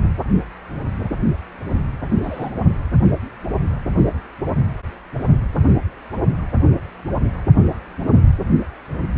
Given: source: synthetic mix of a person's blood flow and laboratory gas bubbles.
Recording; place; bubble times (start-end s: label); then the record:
Doppler ultrasound of blood flow; precordium
2.23-2.50 s: bubbles
From the record:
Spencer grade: 1 (occasional bubble signal discernible with the cardiac motion signal, with majority of cardiac periods free of bubbles); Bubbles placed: anywhere in the cardiac cycle